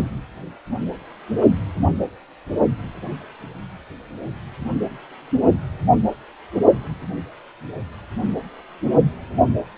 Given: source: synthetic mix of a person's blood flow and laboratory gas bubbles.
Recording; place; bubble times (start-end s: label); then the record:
Doppler ultrasound of blood flow; precordium
no bubbles
From the record:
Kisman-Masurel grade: 000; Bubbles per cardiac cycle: 0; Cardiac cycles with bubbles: 0%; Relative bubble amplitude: no bubbles discernible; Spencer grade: 0 (complete lack of bubble signals)